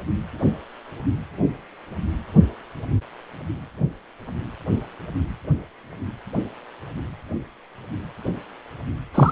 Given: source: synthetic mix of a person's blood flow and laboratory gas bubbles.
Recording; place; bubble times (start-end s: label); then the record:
Doppler ultrasound of blood flow; precordium
9.14-9.32 s: bubbles
From the record:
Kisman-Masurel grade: 212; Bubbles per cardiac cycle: several, 3 to 8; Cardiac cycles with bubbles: 1 to 10%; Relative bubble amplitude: moderate (0.250 to 0.450); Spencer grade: 1 (occasional bubble signal discernible with the cardiac motion signal, with majority of cardiac periods free of bubbles); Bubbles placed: anywhere in the cardiac cycle